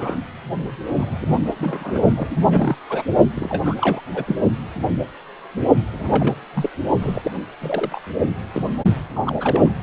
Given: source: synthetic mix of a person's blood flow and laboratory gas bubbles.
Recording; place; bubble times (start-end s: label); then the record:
Doppler ultrasound of blood flow; precordium
0.00-0.17 s: bubbles
0.95-1.54 s: bubbles
1.59-2.00 s: bubbles
2.16-2.37 s: bubbles
2.51-2.77 s: bubbles
2.89-3.04 s: bubbles
3.35-4.01 s: bubbles
4.13-4.36 s: bubbles
5.94-6.34 s: bubbles
6.54-6.70 s: bubbles
7.00-7.31 s: bubbles
7.62-8.02 s: bubbles
8.54-8.62 s: bubbles
9.15-9.20 s: bubbles
9.25-9.36 s: bubbles
9.39-9.73 s: bubbles
From the record:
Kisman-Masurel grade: 232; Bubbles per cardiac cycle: several, 3 to 8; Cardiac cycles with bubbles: 50 to 99%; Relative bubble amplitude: moderate (0.250 to 0.450); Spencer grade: 3 (all of the cardiac periods contain showers or single bubble signals, but not dominating or overriding the cardiac motion signals); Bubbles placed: only in the low amplitude regions of the cardiac cycle